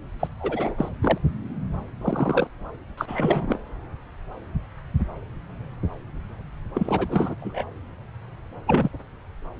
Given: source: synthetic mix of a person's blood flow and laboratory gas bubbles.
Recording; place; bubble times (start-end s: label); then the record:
Doppler ultrasound of blood flow; subclavian vein
0.20-0.27 s: bubbles
0.39-0.89 s: bubbles
1.01-1.18 s: bubbles
2.01-2.47 s: bubbles
2.97-3.58 s: bubbles
6.74-7.07 s: bubbles
7.09-7.35 s: bubbles
7.40-7.64 s: bubbles
8.67-8.90 s: bubbles
From the record:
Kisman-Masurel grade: 222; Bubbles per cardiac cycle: several, 3 to 8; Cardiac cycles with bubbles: 10 to 50%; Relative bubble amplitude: moderate (0.250 to 0.450); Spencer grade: 2 (many but less than half of the cardiac periods contain bubble signals, singularly or in groups); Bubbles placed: anywhere in the cardiac cycle